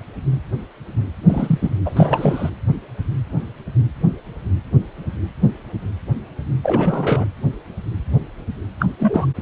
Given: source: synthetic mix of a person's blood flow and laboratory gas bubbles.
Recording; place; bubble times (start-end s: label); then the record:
Doppler ultrasound of blood flow; precordium
1.28-1.70 s: bubbles
1.85-2.50 s: bubbles
6.63-7.25 s: bubbles
8.79-8.85 s: bubbles
8.99-9.26 s: bubbles
From the record:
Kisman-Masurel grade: 222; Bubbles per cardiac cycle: several, 3 to 8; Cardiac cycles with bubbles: 10 to 50%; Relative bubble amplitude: moderate (0.250 to 0.450); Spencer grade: 2 (many but less than half of the cardiac periods contain bubble signals, singularly or in groups); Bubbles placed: anywhere in the cardiac cycle